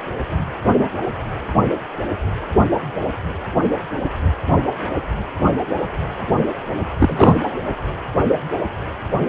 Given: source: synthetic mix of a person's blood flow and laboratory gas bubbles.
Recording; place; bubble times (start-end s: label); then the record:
Doppler ultrasound of blood flow; precordium
6.99-7.36 s: bubbles
From the record:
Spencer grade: 1 (occasional bubble signal discernible with the cardiac motion signal, with majority of cardiac periods free of bubbles); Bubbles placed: anywhere in the cardiac cycle